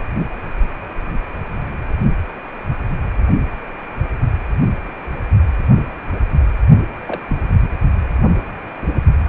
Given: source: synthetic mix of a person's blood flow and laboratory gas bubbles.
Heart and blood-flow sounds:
Doppler ultrasound of blood flow; precordium
7.05-7.20 s: bubbles
7.27-7.38 s: bubbles
From the record:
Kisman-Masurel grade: 111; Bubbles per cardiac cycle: 1 to 2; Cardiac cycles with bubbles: 1 to 10%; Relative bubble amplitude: barely perceptible (0.100 to 0.250); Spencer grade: 1 (occasional bubble signal discernible with the cardiac motion signal, with majority of cardiac periods free of bubbles); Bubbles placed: only in the low amplitude regions of the cardiac cycle

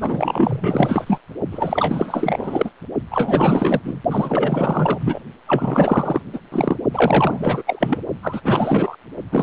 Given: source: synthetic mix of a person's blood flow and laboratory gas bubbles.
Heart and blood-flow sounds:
Doppler ultrasound of blood flow; precordium
0.01-1.18 s: bubbles
1.51-2.70 s: bubbles
3.10-3.80 s: bubbles
3.84-4.00 s: bubbles
4.11-5.20 s: bubbles
5.47-6.21 s: bubbles
6.33-6.40 s: bubbles
6.52-6.76 s: bubbles
6.91-7.62 s: bubbles
7.67-8.00 s: bubbles
8.22-8.40 s: bubbles
8.44-8.96 s: bubbles
9.31-9.43 s: bubbles
From the record:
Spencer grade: 4 (maximum detectable bubble signal sounding continuously throughout systole and diastole of every cardiac period, and overriding the amplitude of the normal cardiac signals); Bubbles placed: only in the low amplitude regions of the cardiac cycle

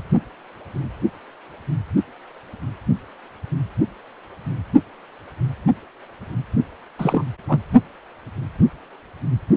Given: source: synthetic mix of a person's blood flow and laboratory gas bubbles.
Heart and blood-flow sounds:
Doppler ultrasound of blood flow; precordium
6.99-7.24 s: bubbles
7.48-7.60 s: bubbles
From the record:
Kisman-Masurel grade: 222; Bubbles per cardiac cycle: several, 3 to 8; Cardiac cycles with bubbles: 10 to 50%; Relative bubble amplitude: moderate (0.250 to 0.450); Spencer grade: 2 (many but less than half of the cardiac periods contain bubble signals, singularly or in groups); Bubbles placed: only in the low amplitude regions of the cardiac cycle

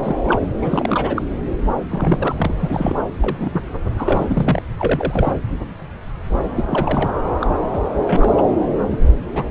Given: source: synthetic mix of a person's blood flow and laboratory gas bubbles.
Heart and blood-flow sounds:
Doppler ultrasound of blood flow; subclavian vein
0.00-0.16 s: bubbles
0.27-0.39 s: bubbles
0.61-1.22 s: bubbles
1.91-2.32 s: bubbles
2.38-2.95 s: bubbles
3.20-3.67 s: bubbles
3.97-4.62 s: bubbles
4.79-5.33 s: bubbles
6.56-7.10 s: bubbles
7.41-7.47 s: bubbles
7.71-7.81 s: bubbles
8.05-8.43 s: bubbles
8.91-8.97 s: bubbles
9.33-9.44 s: bubbles
From the record:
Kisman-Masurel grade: 232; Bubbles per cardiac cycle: several, 3 to 8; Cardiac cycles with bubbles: 50 to 99%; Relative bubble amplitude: moderate (0.250 to 0.450); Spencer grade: 3 (all of the cardiac periods contain showers or single bubble signals, but not dominating or overriding the cardiac motion signals); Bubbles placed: anywhere in the cardiac cycle

